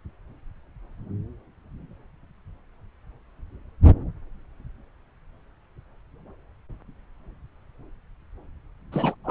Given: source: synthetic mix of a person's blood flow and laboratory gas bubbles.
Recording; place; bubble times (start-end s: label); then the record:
Doppler ultrasound of blood flow; subclavian vein
8.92-9.14 s: bubbles
9.24-9.31 s: bubbles
From the record:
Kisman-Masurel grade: 212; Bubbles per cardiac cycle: several, 3 to 8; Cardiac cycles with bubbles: 1 to 10%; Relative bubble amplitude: moderate (0.250 to 0.450); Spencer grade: 1 (occasional bubble signal discernible with the cardiac motion signal, with majority of cardiac periods free of bubbles); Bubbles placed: anywhere in the cardiac cycle